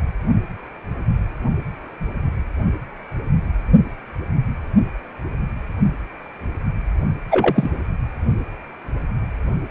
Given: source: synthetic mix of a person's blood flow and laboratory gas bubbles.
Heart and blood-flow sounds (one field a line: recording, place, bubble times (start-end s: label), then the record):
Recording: Doppler ultrasound of blood flow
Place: precordium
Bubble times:
7.31-7.70 s: bubbles
From the record:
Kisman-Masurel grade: 212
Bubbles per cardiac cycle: several, 3 to 8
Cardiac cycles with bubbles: 1 to 10%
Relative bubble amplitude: moderate (0.250 to 0.450)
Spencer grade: 1 (occasional bubble signal discernible with the cardiac motion signal, with majority of cardiac periods free of bubbles)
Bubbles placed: only in the low amplitude regions of the cardiac cycle